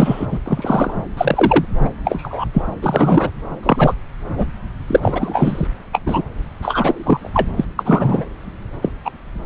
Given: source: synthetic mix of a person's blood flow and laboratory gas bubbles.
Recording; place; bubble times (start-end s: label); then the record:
Doppler ultrasound of blood flow; subclavian vein
0.00-0.26 s: bubbles
0.32-0.39 s: bubbles
0.45-0.93 s: bubbles
1.17-1.65 s: bubbles
1.84-1.90 s: bubbles
2.04-2.45 s: bubbles
2.53-2.62 s: bubbles
2.82-3.30 s: bubbles
3.62-3.94 s: bubbles
4.35-4.45 s: bubbles
4.87-5.67 s: bubbles
5.92-6.01 s: bubbles
6.06-6.24 s: bubbles
6.62-7.30 s: bubbles
7.33-7.49 s: bubbles
7.57-7.65 s: bubbles
7.78-8.25 s: bubbles
8.81-8.89 s: bubbles
9.04-9.11 s: bubbles
From the record:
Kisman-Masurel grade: 243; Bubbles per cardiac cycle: several, 3 to 8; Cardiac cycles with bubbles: 100%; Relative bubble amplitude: loud (0.450 to 0.775); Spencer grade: 3 (all of the cardiac periods contain showers or single bubble signals, but not dominating or overriding the cardiac motion signals); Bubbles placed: anywhere in the cardiac cycle